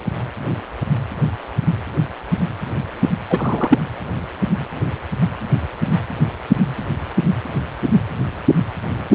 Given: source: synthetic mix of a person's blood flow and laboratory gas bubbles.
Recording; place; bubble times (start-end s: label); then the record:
Doppler ultrasound of blood flow; precordium
3.30-3.78 s: bubbles
From the record:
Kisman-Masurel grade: 212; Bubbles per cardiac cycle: several, 3 to 8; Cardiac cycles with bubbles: 1 to 10%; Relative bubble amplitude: moderate (0.250 to 0.450); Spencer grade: 1 (occasional bubble signal discernible with the cardiac motion signal, with majority of cardiac periods free of bubbles); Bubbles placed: anywhere in the cardiac cycle